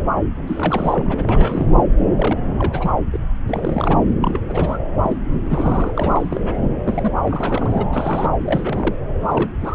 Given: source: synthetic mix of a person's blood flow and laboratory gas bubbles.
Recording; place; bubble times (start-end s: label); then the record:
Doppler ultrasound of blood flow; subclavian vein
0.16-0.23 s: bubbles
0.47-1.82 s: bubbles
2.15-2.38 s: bubbles
2.46-2.90 s: bubbles
3.12-3.17 s: bubbles
3.47-3.99 s: bubbles
4.21-4.42 s: bubbles
4.49-4.79 s: bubbles
5.02-5.17 s: bubbles
5.34-5.93 s: bubbles
5.96-6.58 s: bubbles
6.86-7.12 s: bubbles
7.25-7.85 s: bubbles
7.93-8.30 s: bubbles
8.45-8.96 s: bubbles
9.21-9.50 s: bubbles
9.60-9.75 s: bubbles
From the record:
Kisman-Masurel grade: 342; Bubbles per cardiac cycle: rolling drumbeat, 9 or more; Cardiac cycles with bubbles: 100%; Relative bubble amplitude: moderate (0.250 to 0.450); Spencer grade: 3 (all of the cardiac periods contain showers or single bubble signals, but not dominating or overriding the cardiac motion signals); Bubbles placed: anywhere in the cardiac cycle